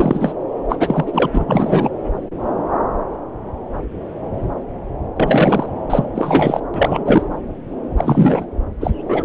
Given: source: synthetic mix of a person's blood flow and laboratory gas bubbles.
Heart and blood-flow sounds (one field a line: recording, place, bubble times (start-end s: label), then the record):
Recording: Doppler ultrasound of blood flow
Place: subclavian vein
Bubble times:
0.00-0.33 s: bubbles
0.69-0.76 s: bubbles
0.79-1.30 s: bubbles
1.33-1.91 s: bubbles
5.16-5.69 s: bubbles
5.89-6.05 s: bubbles
6.15-6.62 s: bubbles
6.74-7.24 s: bubbles
7.96-8.46 s: bubbles
8.80-8.91 s: bubbles
9.08-9.25 s: bubbles
From the record:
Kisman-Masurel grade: 333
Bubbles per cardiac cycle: rolling drumbeat, 9 or more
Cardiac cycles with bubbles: 50 to 99%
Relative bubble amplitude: loud (0.450 to 0.775)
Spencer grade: 3 (all of the cardiac periods contain showers or single bubble signals, but not dominating or overriding the cardiac motion signals)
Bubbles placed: anywhere in the cardiac cycle